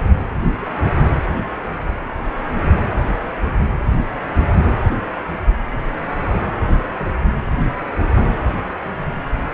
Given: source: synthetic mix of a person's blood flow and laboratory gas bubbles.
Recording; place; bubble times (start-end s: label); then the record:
Doppler ultrasound of blood flow; precordium
0.56-0.70 s: bubbles
2.96-3.25 s: bubbles
5.69-5.78 s: bubbles
6.96-7.08 s: bubbles
8.14-8.21 s: bubbles
From the record:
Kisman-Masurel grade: 121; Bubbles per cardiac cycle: 1 to 2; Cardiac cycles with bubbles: 10 to 50%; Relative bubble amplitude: barely perceptible (0.100 to 0.250); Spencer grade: 2 (many but less than half of the cardiac periods contain bubble signals, singularly or in groups); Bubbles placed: anywhere in the cardiac cycle